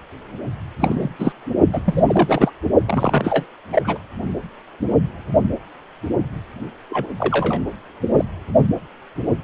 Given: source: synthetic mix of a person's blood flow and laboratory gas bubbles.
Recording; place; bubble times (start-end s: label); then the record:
Doppler ultrasound of blood flow; precordium
0.79-1.09 s: bubbles
1.18-1.32 s: bubbles
1.73-1.81 s: bubbles
1.84-2.51 s: bubbles
2.87-3.46 s: bubbles
3.73-3.98 s: bubbles
6.89-7.07 s: bubbles
7.18-7.61 s: bubbles
8.17-8.24 s: bubbles
From the record:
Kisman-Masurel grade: 232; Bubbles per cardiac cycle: several, 3 to 8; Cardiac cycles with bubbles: 50 to 99%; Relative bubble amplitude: moderate (0.250 to 0.450); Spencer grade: 3 (all of the cardiac periods contain showers or single bubble signals, but not dominating or overriding the cardiac motion signals); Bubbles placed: only in the low amplitude regions of the cardiac cycle